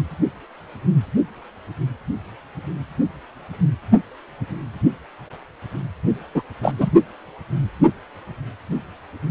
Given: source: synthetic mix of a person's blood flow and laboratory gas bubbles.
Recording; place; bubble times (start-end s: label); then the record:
Doppler ultrasound of blood flow; precordium
6.34-6.42 s: bubbles
6.62-6.71 s: bubbles
6.78-6.92 s: bubbles
From the record:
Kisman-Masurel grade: 213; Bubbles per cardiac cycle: several, 3 to 8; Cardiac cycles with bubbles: 1 to 10%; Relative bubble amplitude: loud (0.450 to 0.775); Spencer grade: 1 (occasional bubble signal discernible with the cardiac motion signal, with majority of cardiac periods free of bubbles); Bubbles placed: only in the low amplitude regions of the cardiac cycle